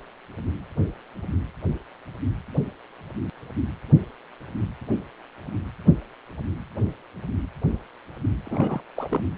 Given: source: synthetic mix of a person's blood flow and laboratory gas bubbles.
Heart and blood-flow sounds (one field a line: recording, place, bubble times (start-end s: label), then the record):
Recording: Doppler ultrasound of blood flow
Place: precordium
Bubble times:
8.46-8.81 s: bubbles
8.96-9.21 s: bubbles
From the record:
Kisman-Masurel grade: 211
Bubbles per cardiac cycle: several, 3 to 8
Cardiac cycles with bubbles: 1 to 10%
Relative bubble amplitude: barely perceptible (0.100 to 0.250)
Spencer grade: 1 (occasional bubble signal discernible with the cardiac motion signal, with majority of cardiac periods free of bubbles)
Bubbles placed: anywhere in the cardiac cycle